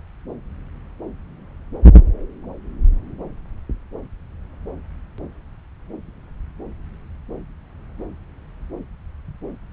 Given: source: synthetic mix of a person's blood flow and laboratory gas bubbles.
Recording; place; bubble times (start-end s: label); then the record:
Doppler ultrasound of blood flow; subclavian vein
no bubbles
From the record:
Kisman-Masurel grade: 000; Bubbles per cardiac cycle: 0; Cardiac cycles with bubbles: 0%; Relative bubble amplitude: no bubbles discernible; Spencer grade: 0 (complete lack of bubble signals)